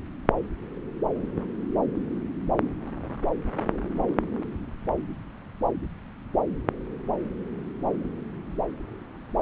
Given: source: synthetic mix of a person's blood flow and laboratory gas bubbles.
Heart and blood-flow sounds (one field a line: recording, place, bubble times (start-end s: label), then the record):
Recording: Doppler ultrasound of blood flow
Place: subclavian vein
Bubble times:
no bubbles
From the record:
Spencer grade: 0 (complete lack of bubble signals)